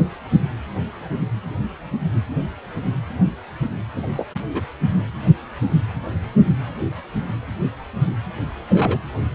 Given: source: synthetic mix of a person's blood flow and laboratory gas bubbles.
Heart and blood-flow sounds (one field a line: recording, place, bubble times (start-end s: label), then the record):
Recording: Doppler ultrasound of blood flow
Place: precordium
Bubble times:
3.96-4.07 s: bubbles
4.15-4.25 s: bubbles
4.53-4.62 s: bubbles
8.69-9.01 s: bubbles
From the record:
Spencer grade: 2 (many but less than half of the cardiac periods contain bubble signals, singularly or in groups)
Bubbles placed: anywhere in the cardiac cycle